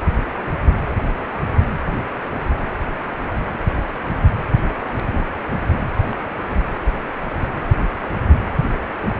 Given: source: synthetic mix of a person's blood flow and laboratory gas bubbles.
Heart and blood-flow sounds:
Doppler ultrasound of blood flow; precordium
6.00-6.16 s: bubbles
6.43-6.67 s: bubbles
From the record:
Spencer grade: 1 (occasional bubble signal discernible with the cardiac motion signal, with majority of cardiac periods free of bubbles); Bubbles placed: anywhere in the cardiac cycle

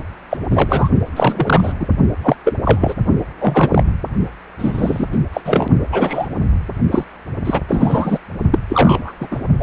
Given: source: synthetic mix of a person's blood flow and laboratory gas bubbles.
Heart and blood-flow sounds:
Doppler ultrasound of blood flow; precordium
0.30-0.37 s: bubbles
0.50-0.89 s: bubbles
1.16-1.73 s: bubbles
1.79-1.87 s: bubbles
2.23-2.36 s: bubbles
2.45-2.53 s: bubbles
2.65-2.95 s: bubbles
3.39-3.83 s: bubbles
4.58-5.06 s: bubbles
5.12-5.19 s: bubbles
5.33-5.41 s: bubbles
5.45-5.67 s: bubbles
5.92-6.27 s: bubbles
6.92-7.05 s: bubbles
7.45-7.62 s: bubbles
7.68-8.19 s: bubbles
8.51-8.59 s: bubbles
8.69-9.12 s: bubbles
9.20-9.28 s: bubbles
9.31-9.40 s: bubbles
9.59-9.63 s: bubbles
From the record:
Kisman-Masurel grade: 243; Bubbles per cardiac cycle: several, 3 to 8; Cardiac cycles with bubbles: 100%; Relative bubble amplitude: loud (0.450 to 0.775); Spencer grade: 3 (all of the cardiac periods contain showers or single bubble signals, but not dominating or overriding the cardiac motion signals); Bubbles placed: only in the low amplitude regions of the cardiac cycle

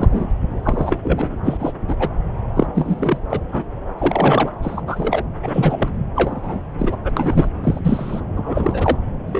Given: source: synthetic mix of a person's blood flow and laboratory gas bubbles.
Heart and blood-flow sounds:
Doppler ultrasound of blood flow; subclavian vein
0.00-0.28 s: bubbles
0.63-0.98 s: bubbles
1.03-1.36 s: bubbles
1.44-1.74 s: bubbles
1.88-1.96 s: bubbles
1.99-2.10 s: bubbles
2.55-2.67 s: bubbles
2.75-3.18 s: bubbles
3.29-3.41 s: bubbles
3.52-3.63 s: bubbles
3.98-4.50 s: bubbles
4.62-4.82 s: bubbles
4.87-5.23 s: bubbles
5.42-5.90 s: bubbles
6.16-6.60 s: bubbles
6.79-6.96 s: bubbles
7.04-7.12 s: bubbles
7.17-7.49 s: bubbles
7.63-7.79 s: bubbles
7.83-8.21 s: bubbles
8.37-8.97 s: bubbles
9.27-9.40 s: bubbles
From the record:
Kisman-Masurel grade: 243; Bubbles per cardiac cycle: several, 3 to 8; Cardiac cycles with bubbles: 100%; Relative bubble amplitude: loud (0.450 to 0.775); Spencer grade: 3 (all of the cardiac periods contain showers or single bubble signals, but not dominating or overriding the cardiac motion signals); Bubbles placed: anywhere in the cardiac cycle

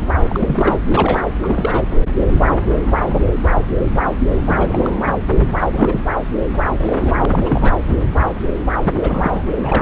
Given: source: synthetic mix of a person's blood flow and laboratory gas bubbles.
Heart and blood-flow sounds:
Doppler ultrasound of blood flow; subclavian vein
0.29-0.77 s: bubbles
0.85-1.25 s: bubbles
1.41-1.83 s: bubbles
4.46-4.90 s: bubbles
5.59-5.67 s: bubbles
5.71-6.00 s: bubbles
6.79-7.25 s: bubbles
7.28-7.72 s: bubbles
8.81-8.93 s: bubbles
9.01-9.44 s: bubbles
9.57-9.82 s: bubbles
From the record:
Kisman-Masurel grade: 332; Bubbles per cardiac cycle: rolling drumbeat, 9 or more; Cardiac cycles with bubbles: 50 to 99%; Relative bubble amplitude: moderate (0.250 to 0.450); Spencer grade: 3 (all of the cardiac periods contain showers or single bubble signals, but not dominating or overriding the cardiac motion signals); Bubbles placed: anywhere in the cardiac cycle

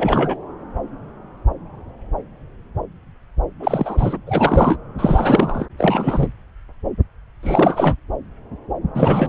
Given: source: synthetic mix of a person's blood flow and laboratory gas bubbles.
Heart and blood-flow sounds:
Doppler ultrasound of blood flow; subclavian vein
0.00-0.36 s: bubbles
3.59-4.17 s: bubbles
4.26-4.77 s: bubbles
4.97-5.66 s: bubbles
5.78-6.28 s: bubbles
7.43-7.95 s: bubbles
8.94-9.29 s: bubbles
From the record:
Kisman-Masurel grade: 333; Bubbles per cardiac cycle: rolling drumbeat, 9 or more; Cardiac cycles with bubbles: 50 to 99%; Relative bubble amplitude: loud (0.450 to 0.775); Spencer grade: 3 (all of the cardiac periods contain showers or single bubble signals, but not dominating or overriding the cardiac motion signals); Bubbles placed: anywhere in the cardiac cycle

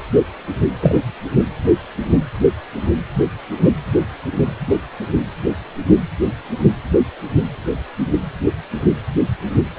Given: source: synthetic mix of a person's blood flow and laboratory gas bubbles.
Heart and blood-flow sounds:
Doppler ultrasound of blood flow; precordium
0.81-1.03 s: bubbles
From the record:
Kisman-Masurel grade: 113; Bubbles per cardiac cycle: 1 to 2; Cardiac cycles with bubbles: 1 to 10%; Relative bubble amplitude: loud (0.450 to 0.775); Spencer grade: 1 (occasional bubble signal discernible with the cardiac motion signal, with majority of cardiac periods free of bubbles); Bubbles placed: anywhere in the cardiac cycle

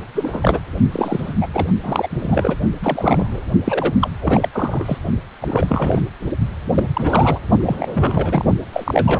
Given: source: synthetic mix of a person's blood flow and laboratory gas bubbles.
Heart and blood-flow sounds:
Doppler ultrasound of blood flow; precordium
0.14-0.59 s: bubbles
0.91-1.34 s: bubbles
1.41-1.47 s: bubbles
1.54-1.69 s: bubbles
1.83-2.56 s: bubbles
2.81-3.42 s: bubbles
3.65-3.94 s: bubbles
4.00-4.10 s: bubbles
4.21-4.48 s: bubbles
4.52-4.97 s: bubbles
5.40-6.01 s: bubbles
6.74-6.90 s: bubbles
6.93-7.39 s: bubbles
7.60-7.76 s: bubbles
7.78-8.45 s: bubbles
8.72-9.20 s: bubbles
From the record:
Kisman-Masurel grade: 343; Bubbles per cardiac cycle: rolling drumbeat, 9 or more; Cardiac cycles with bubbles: 100%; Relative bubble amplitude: loud (0.450 to 0.775); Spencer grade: 3 (all of the cardiac periods contain showers or single bubble signals, but not dominating or overriding the cardiac motion signals); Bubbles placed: only in the low amplitude regions of the cardiac cycle

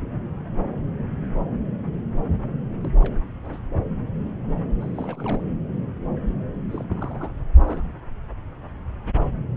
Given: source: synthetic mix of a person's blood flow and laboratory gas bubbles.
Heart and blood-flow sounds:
Doppler ultrasound of blood flow; subclavian vein
2.82-2.91 s: bubbles
3.02-3.15 s: bubbles
3.45-3.58 s: bubbles
4.81-4.91 s: bubbles
4.95-5.42 s: bubbles
6.69-6.84 s: bubbles
6.90-7.32 s: bubbles
7.66-7.82 s: bubbles
From the record:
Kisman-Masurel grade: 221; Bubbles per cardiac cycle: several, 3 to 8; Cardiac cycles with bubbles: 10 to 50%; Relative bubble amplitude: barely perceptible (0.100 to 0.250); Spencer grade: 2 (many but less than half of the cardiac periods contain bubble signals, singularly or in groups); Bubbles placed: anywhere in the cardiac cycle

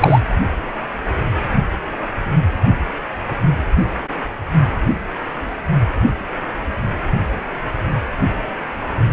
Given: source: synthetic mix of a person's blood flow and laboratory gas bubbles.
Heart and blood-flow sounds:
Doppler ultrasound of blood flow; precordium
0.00-0.20 s: bubbles
From the record:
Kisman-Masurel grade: 213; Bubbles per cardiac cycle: several, 3 to 8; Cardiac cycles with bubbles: 1 to 10%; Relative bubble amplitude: loud (0.450 to 0.775); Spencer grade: 1 (occasional bubble signal discernible with the cardiac motion signal, with majority of cardiac periods free of bubbles); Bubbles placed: only in the low amplitude regions of the cardiac cycle

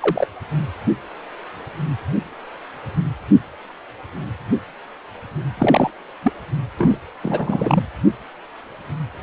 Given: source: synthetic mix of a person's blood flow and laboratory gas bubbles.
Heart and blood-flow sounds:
Doppler ultrasound of blood flow; precordium
0.01-0.27 s: bubbles
5.57-5.90 s: bubbles
6.22-6.32 s: bubbles
6.78-6.97 s: bubbles
7.21-7.83 s: bubbles
From the record:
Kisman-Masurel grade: 222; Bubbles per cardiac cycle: several, 3 to 8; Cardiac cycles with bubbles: 10 to 50%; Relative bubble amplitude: moderate (0.250 to 0.450); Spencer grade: 2 (many but less than half of the cardiac periods contain bubble signals, singularly or in groups); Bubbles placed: anywhere in the cardiac cycle

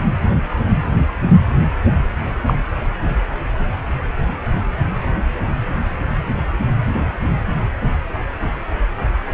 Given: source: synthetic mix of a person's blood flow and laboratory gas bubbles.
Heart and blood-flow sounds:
Doppler ultrasound of blood flow; precordium
2.46-2.54 s: bubbles
From the record:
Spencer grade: 1 (occasional bubble signal discernible with the cardiac motion signal, with majority of cardiac periods free of bubbles); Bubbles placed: anywhere in the cardiac cycle

